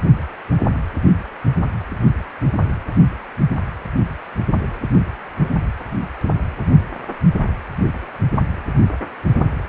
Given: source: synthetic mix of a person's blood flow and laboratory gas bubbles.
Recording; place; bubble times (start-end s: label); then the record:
Doppler ultrasound of blood flow; precordium
no bubbles
From the record:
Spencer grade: 0 (complete lack of bubble signals)